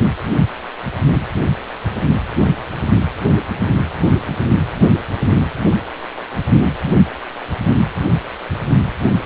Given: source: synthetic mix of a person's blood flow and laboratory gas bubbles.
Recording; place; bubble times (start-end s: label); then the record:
Doppler ultrasound of blood flow; precordium
no bubbles
From the record:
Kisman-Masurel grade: 000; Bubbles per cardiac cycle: 0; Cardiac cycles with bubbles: 0%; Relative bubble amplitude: no bubbles discernible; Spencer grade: 0 (complete lack of bubble signals)